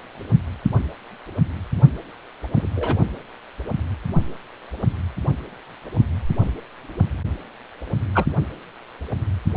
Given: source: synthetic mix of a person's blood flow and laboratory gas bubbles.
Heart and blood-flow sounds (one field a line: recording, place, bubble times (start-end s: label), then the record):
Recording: Doppler ultrasound of blood flow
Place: precordium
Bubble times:
2.54-2.69 s: bubbles
2.75-2.98 s: bubbles
8.14-8.25 s: bubbles
From the record:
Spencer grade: 2 (many but less than half of the cardiac periods contain bubble signals, singularly or in groups)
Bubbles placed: only in the low amplitude regions of the cardiac cycle